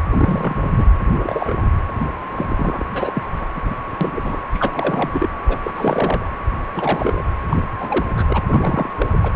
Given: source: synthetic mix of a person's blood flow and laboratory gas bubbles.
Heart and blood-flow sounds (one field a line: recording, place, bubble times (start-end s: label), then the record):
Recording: Doppler ultrasound of blood flow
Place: precordium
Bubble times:
0.11-0.89 s: bubbles
1.00-1.70 s: bubbles
2.35-2.86 s: bubbles
2.90-3.23 s: bubbles
3.32-3.48 s: bubbles
3.54-3.76 s: bubbles
4.00-4.37 s: bubbles
4.53-5.29 s: bubbles
5.47-5.58 s: bubbles
5.63-5.72 s: bubbles
5.75-6.25 s: bubbles
6.76-7.24 s: bubbles
7.49-7.64 s: bubbles
7.79-8.05 s: bubbles
8.15-8.24 s: bubbles
8.29-8.44 s: bubbles
8.47-9.06 s: bubbles
9.12-9.18 s: bubbles
9.22-9.32 s: bubbles
From the record:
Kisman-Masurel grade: 342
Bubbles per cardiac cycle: rolling drumbeat, 9 or more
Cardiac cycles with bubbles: 100%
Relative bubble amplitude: moderate (0.250 to 0.450)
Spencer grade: 3 (all of the cardiac periods contain showers or single bubble signals, but not dominating or overriding the cardiac motion signals)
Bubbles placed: anywhere in the cardiac cycle